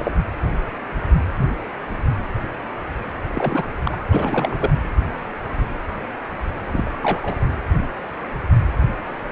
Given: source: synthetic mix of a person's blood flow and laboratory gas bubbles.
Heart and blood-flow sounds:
Doppler ultrasound of blood flow; precordium
0.00-0.11 s: bubbles
3.34-3.64 s: bubbles
3.85-3.97 s: bubbles
4.12-4.71 s: bubbles
6.72-6.91 s: bubbles
7.01-7.46 s: bubbles
From the record:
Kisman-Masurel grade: 222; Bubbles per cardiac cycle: several, 3 to 8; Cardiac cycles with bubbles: 10 to 50%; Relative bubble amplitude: moderate (0.250 to 0.450); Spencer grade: 2 (many but less than half of the cardiac periods contain bubble signals, singularly or in groups); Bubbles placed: anywhere in the cardiac cycle

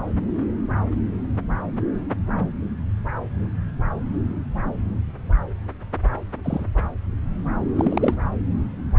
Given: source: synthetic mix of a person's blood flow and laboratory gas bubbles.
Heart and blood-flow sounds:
Doppler ultrasound of blood flow; subclavian vein
6.44-6.65 s: bubbles
7.75-8.14 s: bubbles
From the record:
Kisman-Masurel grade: 122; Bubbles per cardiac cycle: 1 to 2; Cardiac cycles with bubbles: 10 to 50%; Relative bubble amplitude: moderate (0.250 to 0.450); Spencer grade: 2 (many but less than half of the cardiac periods contain bubble signals, singularly or in groups); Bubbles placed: anywhere in the cardiac cycle

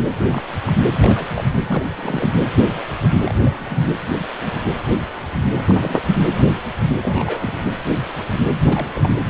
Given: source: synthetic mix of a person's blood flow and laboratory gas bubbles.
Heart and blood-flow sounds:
Doppler ultrasound of blood flow; precordium
0.00-0.02 s: bubbles
0.05-0.08 s: bubbles
0.29-0.43 s: bubbles
0.65-0.73 s: bubbles
0.88-1.50 s: bubbles
1.66-1.89 s: bubbles
1.96-2.31 s: bubbles
3.24-3.77 s: bubbles
5.65-6.02 s: bubbles
7.03-7.54 s: bubbles
8.64-9.09 s: bubbles
From the record:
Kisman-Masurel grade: 221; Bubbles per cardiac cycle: several, 3 to 8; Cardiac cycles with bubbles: 10 to 50%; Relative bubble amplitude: barely perceptible (0.100 to 0.250); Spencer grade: 2 (many but less than half of the cardiac periods contain bubble signals, singularly or in groups); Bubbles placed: anywhere in the cardiac cycle

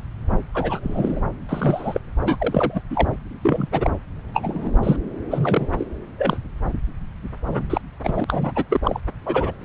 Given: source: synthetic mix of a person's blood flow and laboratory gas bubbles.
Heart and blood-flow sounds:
Doppler ultrasound of blood flow; subclavian vein
0.54-0.79 s: bubbles
0.82-1.20 s: bubbles
1.48-2.00 s: bubbles
2.25-2.83 s: bubbles
2.90-3.08 s: bubbles
3.42-3.67 s: bubbles
3.72-3.90 s: bubbles
4.33-4.71 s: bubbles
4.83-4.96 s: bubbles
5.30-5.86 s: bubbles
6.17-6.39 s: bubbles
7.46-7.81 s: bubbles
8.04-8.25 s: bubbles
8.28-8.52 s: bubbles
8.55-8.65 s: bubbles
8.69-8.80 s: bubbles
8.83-9.00 s: bubbles
9.26-9.52 s: bubbles
9.61-9.65 s: bubbles
From the record:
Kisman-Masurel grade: 233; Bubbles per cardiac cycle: several, 3 to 8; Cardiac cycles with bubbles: 50 to 99%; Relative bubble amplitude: loud (0.450 to 0.775); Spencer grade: 3 (all of the cardiac periods contain showers or single bubble signals, but not dominating or overriding the cardiac motion signals); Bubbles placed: anywhere in the cardiac cycle

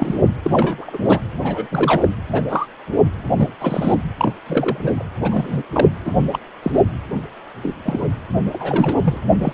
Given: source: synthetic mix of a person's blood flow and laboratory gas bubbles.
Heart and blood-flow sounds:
Doppler ultrasound of blood flow; precordium
0.00-0.16 s: bubbles
0.43-0.51 s: bubbles
0.53-0.98 s: bubbles
1.09-1.20 s: bubbles
1.42-1.69 s: bubbles
1.71-2.11 s: bubbles
2.29-2.44 s: bubbles
2.49-2.66 s: bubbles
3.37-3.51 s: bubbles
3.60-3.95 s: bubbles
4.17-4.33 s: bubbles
4.46-5.03 s: bubbles
5.23-5.62 s: bubbles
5.74-5.88 s: bubbles
6.04-6.25 s: bubbles
6.32-6.39 s: bubbles
6.62-6.82 s: bubbles
7.63-7.75 s: bubbles
7.84-8.06 s: bubbles
8.53-8.98 s: bubbles
9.03-9.17 s: bubbles
9.40-9.52 s: bubbles
From the record:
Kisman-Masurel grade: 232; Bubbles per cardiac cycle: several, 3 to 8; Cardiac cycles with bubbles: 50 to 99%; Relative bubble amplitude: moderate (0.250 to 0.450); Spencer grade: 3 (all of the cardiac periods contain showers or single bubble signals, but not dominating or overriding the cardiac motion signals); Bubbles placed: anywhere in the cardiac cycle

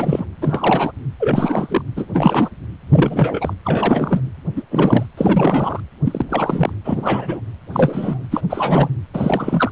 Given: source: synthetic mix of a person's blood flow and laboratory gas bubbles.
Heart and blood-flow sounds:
Doppler ultrasound of blood flow; precordium
0.00-0.26 s: bubbles
0.41-0.92 s: bubbles
1.20-1.82 s: bubbles
1.96-2.06 s: bubbles
2.13-2.49 s: bubbles
2.90-3.54 s: bubbles
3.64-4.22 s: bubbles
4.56-4.63 s: bubbles
4.71-5.06 s: bubbles
5.17-5.80 s: bubbles
6.05-6.25 s: bubbles
6.29-6.72 s: bubbles
6.84-7.40 s: bubbles
7.72-8.24 s: bubbles
8.31-8.41 s: bubbles
8.50-8.88 s: bubbles
9.13-9.71 s: bubbles
From the record:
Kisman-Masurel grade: 343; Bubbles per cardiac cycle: rolling drumbeat, 9 or more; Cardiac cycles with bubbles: 100%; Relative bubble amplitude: loud (0.450 to 0.775); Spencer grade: 3 (all of the cardiac periods contain showers or single bubble signals, but not dominating or overriding the cardiac motion signals); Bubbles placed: anywhere in the cardiac cycle

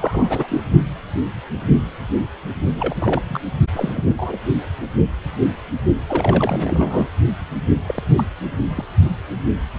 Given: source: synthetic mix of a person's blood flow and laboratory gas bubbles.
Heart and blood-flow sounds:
Doppler ultrasound of blood flow; precordium
0.00-0.60 s: bubbles
2.76-3.41 s: bubbles
3.74-4.04 s: bubbles
4.17-4.38 s: bubbles
6.07-7.08 s: bubbles
7.88-8.03 s: bubbles
8.16-8.25 s: bubbles
8.76-8.84 s: bubbles
From the record:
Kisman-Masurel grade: 232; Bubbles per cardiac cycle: several, 3 to 8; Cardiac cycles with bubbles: 50 to 99%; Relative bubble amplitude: moderate (0.250 to 0.450); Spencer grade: 3 (all of the cardiac periods contain showers or single bubble signals, but not dominating or overriding the cardiac motion signals); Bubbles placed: only in the low amplitude regions of the cardiac cycle

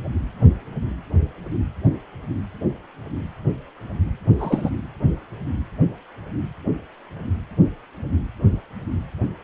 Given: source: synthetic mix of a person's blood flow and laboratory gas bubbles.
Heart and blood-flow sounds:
Doppler ultrasound of blood flow; precordium
4.37-4.70 s: bubbles
From the record:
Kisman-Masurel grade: 113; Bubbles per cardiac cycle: 1 to 2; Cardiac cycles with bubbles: 1 to 10%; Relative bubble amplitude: loud (0.450 to 0.775); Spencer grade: 1 (occasional bubble signal discernible with the cardiac motion signal, with majority of cardiac periods free of bubbles); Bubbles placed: anywhere in the cardiac cycle

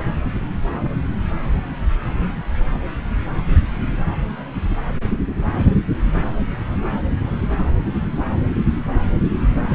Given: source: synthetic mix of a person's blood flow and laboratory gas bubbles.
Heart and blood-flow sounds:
Doppler ultrasound of blood flow; subclavian vein
9.64-9.75 s: bubbles
From the record:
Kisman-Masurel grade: 211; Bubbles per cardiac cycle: several, 3 to 8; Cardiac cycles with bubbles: 1 to 10%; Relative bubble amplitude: barely perceptible (0.100 to 0.250); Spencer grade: 1 (occasional bubble signal discernible with the cardiac motion signal, with majority of cardiac periods free of bubbles); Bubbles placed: anywhere in the cardiac cycle

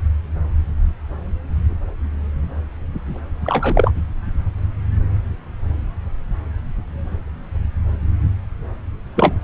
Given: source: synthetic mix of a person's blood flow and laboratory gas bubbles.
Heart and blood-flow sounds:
Doppler ultrasound of blood flow; subclavian vein
3.44-3.91 s: bubbles
9.16-9.35 s: bubbles
From the record:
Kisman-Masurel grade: 113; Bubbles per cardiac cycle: 1 to 2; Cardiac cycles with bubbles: 1 to 10%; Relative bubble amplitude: loud (0.450 to 0.775); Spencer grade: 1 (occasional bubble signal discernible with the cardiac motion signal, with majority of cardiac periods free of bubbles); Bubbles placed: anywhere in the cardiac cycle

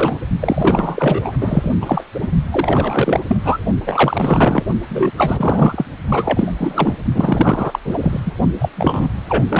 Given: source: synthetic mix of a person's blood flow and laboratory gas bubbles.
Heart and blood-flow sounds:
Doppler ultrasound of blood flow; precordium
0.00-0.16 s: bubbles
0.40-1.33 s: bubbles
1.41-1.71 s: bubbles
1.81-2.05 s: bubbles
2.14-2.27 s: bubbles
2.52-3.20 s: bubbles
3.28-3.37 s: bubbles
3.42-3.63 s: bubbles
3.86-4.63 s: bubbles
4.88-5.11 s: bubbles
5.17-5.85 s: bubbles
6.08-6.54 s: bubbles
6.58-6.97 s: bubbles
7.14-7.79 s: bubbles
7.84-7.98 s: bubbles
8.01-8.20 s: bubbles
8.25-8.33 s: bubbles
8.59-8.69 s: bubbles
8.76-9.09 s: bubbles
9.28-9.44 s: bubbles
9.49-9.59 s: bubbles
From the record:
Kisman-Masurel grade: 343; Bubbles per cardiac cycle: rolling drumbeat, 9 or more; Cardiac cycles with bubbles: 100%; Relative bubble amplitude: loud (0.450 to 0.775); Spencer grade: 3 (all of the cardiac periods contain showers or single bubble signals, but not dominating or overriding the cardiac motion signals); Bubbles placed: only in the low amplitude regions of the cardiac cycle

